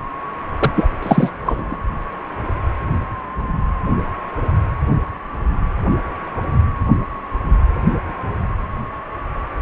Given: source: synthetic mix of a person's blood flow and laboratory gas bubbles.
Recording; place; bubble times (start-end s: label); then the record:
Doppler ultrasound of blood flow; precordium
0.60-0.73 s: bubbles
0.75-0.90 s: bubbles
1.02-1.30 s: bubbles
1.42-1.77 s: bubbles
From the record:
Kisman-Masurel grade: 213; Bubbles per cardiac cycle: several, 3 to 8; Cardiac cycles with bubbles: 1 to 10%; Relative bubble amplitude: loud (0.450 to 0.775); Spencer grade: 1 (occasional bubble signal discernible with the cardiac motion signal, with majority of cardiac periods free of bubbles); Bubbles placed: anywhere in the cardiac cycle